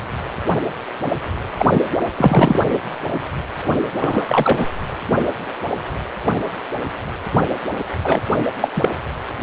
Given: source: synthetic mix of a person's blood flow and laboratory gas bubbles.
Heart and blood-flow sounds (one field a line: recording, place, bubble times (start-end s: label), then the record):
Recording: Doppler ultrasound of blood flow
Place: precordium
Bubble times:
1.58-1.79 s: bubbles
2.17-2.59 s: bubbles
4.00-4.67 s: bubbles
8.04-8.22 s: bubbles
8.60-8.68 s: bubbles
8.75-8.93 s: bubbles
From the record:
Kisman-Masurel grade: 223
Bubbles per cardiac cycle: several, 3 to 8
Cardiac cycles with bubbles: 10 to 50%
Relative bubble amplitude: loud (0.450 to 0.775)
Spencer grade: 2 (many but less than half of the cardiac periods contain bubble signals, singularly or in groups)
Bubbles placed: anywhere in the cardiac cycle